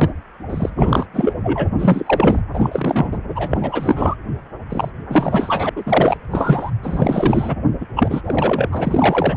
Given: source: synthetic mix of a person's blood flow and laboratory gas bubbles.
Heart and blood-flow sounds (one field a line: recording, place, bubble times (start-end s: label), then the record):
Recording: Doppler ultrasound of blood flow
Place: precordium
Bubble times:
0.00-0.10 s: bubbles
0.49-1.06 s: bubbles
1.14-1.33 s: bubbles
1.43-1.69 s: bubbles
1.78-2.41 s: bubbles
2.53-3.18 s: bubbles
3.35-4.15 s: bubbles
4.70-4.90 s: bubbles
5.09-5.70 s: bubbles
5.75-6.17 s: bubbles
6.31-6.70 s: bubbles
6.83-7.56 s: bubbles
7.80-7.87 s: bubbles
7.96-8.21 s: bubbles
8.25-8.68 s: bubbles
8.71-9.37 s: bubbles
From the record:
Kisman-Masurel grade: 343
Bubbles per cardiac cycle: rolling drumbeat, 9 or more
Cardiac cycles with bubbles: 100%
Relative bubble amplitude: loud (0.450 to 0.775)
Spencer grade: 3 (all of the cardiac periods contain showers or single bubble signals, but not dominating or overriding the cardiac motion signals)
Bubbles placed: anywhere in the cardiac cycle